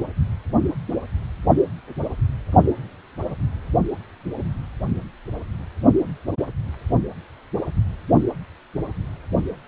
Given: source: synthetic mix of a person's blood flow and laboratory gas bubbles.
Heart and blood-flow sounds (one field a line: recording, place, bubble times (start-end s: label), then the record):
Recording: Doppler ultrasound of blood flow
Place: precordium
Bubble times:
no bubbles
From the record:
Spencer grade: 0 (complete lack of bubble signals)